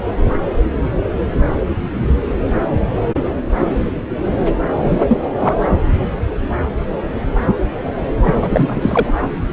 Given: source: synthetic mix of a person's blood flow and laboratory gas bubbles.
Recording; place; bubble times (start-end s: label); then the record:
Doppler ultrasound of blood flow; subclavian vein
4.83-4.99 s: bubbles
5.08-5.18 s: bubbles
5.40-5.54 s: bubbles
8.23-9.14 s: bubbles
From the record:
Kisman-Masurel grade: 223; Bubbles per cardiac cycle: several, 3 to 8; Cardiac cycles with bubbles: 10 to 50%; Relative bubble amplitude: loud (0.450 to 0.775); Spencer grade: 2 (many but less than half of the cardiac periods contain bubble signals, singularly or in groups); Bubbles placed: anywhere in the cardiac cycle